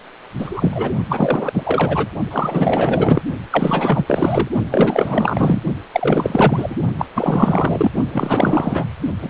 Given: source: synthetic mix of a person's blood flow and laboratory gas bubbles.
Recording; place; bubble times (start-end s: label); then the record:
Doppler ultrasound of blood flow; precordium
0.38-0.91 s: bubbles
1.09-1.52 s: bubbles
1.54-2.08 s: bubbles
2.30-3.22 s: bubbles
3.50-4.49 s: bubbles
4.70-5.62 s: bubbles
5.93-6.75 s: bubbles
6.99-7.06 s: bubbles
7.15-7.91 s: bubbles
8.12-8.86 s: bubbles
9.21-9.30 s: bubbles
From the record:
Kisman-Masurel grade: 444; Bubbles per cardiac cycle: continuous sound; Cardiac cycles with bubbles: 100%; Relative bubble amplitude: maximal (0.775 to 0.999); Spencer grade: 4 (maximum detectable bubble signal sounding continuously throughout systole and diastole of every cardiac period, and overriding the amplitude of the normal cardiac signals); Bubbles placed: only in the low amplitude regions of the cardiac cycle